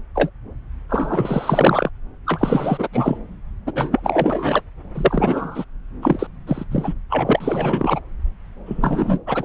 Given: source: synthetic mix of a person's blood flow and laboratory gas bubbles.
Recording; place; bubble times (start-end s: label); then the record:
Doppler ultrasound of blood flow; subclavian vein
0.15-0.30 s: bubbles
0.89-1.90 s: bubbles
2.25-2.88 s: bubbles
2.92-3.18 s: bubbles
3.66-3.73 s: bubbles
3.76-4.61 s: bubbles
4.95-5.64 s: bubbles
6.02-6.27 s: bubbles
6.47-6.64 s: bubbles
6.71-6.94 s: bubbles
7.10-8.01 s: bubbles
8.66-9.19 s: bubbles
9.26-9.45 s: bubbles
From the record:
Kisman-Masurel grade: 243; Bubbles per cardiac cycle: several, 3 to 8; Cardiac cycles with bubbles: 100%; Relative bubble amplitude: loud (0.450 to 0.775); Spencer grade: 3 (all of the cardiac periods contain showers or single bubble signals, but not dominating or overriding the cardiac motion signals); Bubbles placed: anywhere in the cardiac cycle